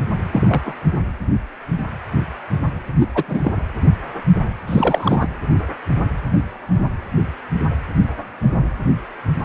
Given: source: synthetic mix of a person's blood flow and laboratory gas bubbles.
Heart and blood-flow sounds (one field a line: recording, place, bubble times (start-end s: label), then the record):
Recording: Doppler ultrasound of blood flow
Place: precordium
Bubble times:
0.32-0.62 s: bubbles
0.65-0.75 s: bubbles
2.99-3.07 s: bubbles
3.15-3.24 s: bubbles
3.28-3.52 s: bubbles
4.67-5.26 s: bubbles
From the record:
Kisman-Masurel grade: 223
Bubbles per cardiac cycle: several, 3 to 8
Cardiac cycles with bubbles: 10 to 50%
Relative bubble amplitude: loud (0.450 to 0.775)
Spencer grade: 2 (many but less than half of the cardiac periods contain bubble signals, singularly or in groups)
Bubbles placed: anywhere in the cardiac cycle